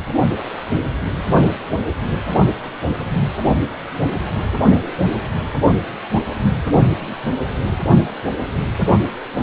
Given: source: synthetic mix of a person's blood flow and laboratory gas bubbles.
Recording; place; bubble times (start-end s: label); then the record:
Doppler ultrasound of blood flow; precordium
no bubbles
From the record:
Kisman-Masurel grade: 000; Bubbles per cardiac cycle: 0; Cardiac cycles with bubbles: 0%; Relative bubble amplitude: no bubbles discernible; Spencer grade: 0 (complete lack of bubble signals)